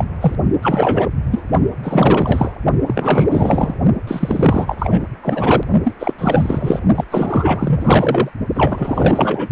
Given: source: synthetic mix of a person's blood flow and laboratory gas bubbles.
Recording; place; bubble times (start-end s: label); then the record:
Doppler ultrasound of blood flow; precordium
0.00-0.04 s: bubbles
0.20-0.35 s: bubbles
0.62-1.08 s: bubbles
1.31-1.42 s: bubbles
1.83-2.58 s: bubbles
2.86-3.74 s: bubbles
4.07-4.75 s: bubbles
4.78-5.03 s: bubbles
5.22-5.64 s: bubbles
5.83-5.96 s: bubbles
6.00-6.14 s: bubbles
6.18-6.80 s: bubbles
6.95-7.04 s: bubbles
7.10-8.29 s: bubbles
8.54-9.48 s: bubbles
From the record:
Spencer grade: 4 (maximum detectable bubble signal sounding continuously throughout systole and diastole of every cardiac period, and overriding the amplitude of the normal cardiac signals); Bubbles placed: only in the low amplitude regions of the cardiac cycle